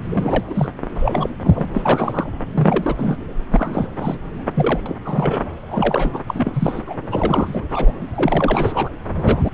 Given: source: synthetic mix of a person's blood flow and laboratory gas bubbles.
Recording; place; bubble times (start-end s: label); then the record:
Doppler ultrasound of blood flow; subclavian vein
0.11-0.70 s: bubbles
0.94-1.30 s: bubbles
1.42-1.69 s: bubbles
1.73-2.29 s: bubbles
2.56-3.17 s: bubbles
3.50-3.89 s: bubbles
3.98-4.17 s: bubbles
4.54-4.80 s: bubbles
4.85-4.95 s: bubbles
5.04-5.52 s: bubbles
5.70-6.19 s: bubbles
6.26-6.82 s: bubbles
6.86-6.95 s: bubbles
7.11-7.65 s: bubbles
7.71-7.92 s: bubbles
8.15-8.90 s: bubbles
9.16-9.51 s: bubbles
From the record:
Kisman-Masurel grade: 342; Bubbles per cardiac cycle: rolling drumbeat, 9 or more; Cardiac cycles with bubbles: 100%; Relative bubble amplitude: moderate (0.250 to 0.450); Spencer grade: 3 (all of the cardiac periods contain showers or single bubble signals, but not dominating or overriding the cardiac motion signals); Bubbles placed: anywhere in the cardiac cycle